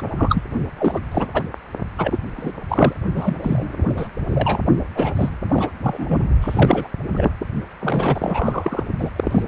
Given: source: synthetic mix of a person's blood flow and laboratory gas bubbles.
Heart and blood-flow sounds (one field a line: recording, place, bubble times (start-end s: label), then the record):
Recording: Doppler ultrasound of blood flow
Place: precordium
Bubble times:
0.15-0.42 s: bubbles
0.79-1.01 s: bubbles
1.11-1.29 s: bubbles
1.33-1.44 s: bubbles
1.98-2.19 s: bubbles
2.36-2.53 s: bubbles
2.69-2.94 s: bubbles
3.13-3.37 s: bubbles
3.43-4.08 s: bubbles
4.26-4.62 s: bubbles
4.95-5.29 s: bubbles
5.51-5.70 s: bubbles
5.83-6.20 s: bubbles
6.41-6.88 s: bubbles
7.12-7.29 s: bubbles
7.80-8.83 s: bubbles
8.98-9.09 s: bubbles
9.16-9.42 s: bubbles
From the record:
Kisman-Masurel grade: 343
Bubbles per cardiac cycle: rolling drumbeat, 9 or more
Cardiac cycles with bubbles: 100%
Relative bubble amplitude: loud (0.450 to 0.775)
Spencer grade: 3 (all of the cardiac periods contain showers or single bubble signals, but not dominating or overriding the cardiac motion signals)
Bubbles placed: only in the low amplitude regions of the cardiac cycle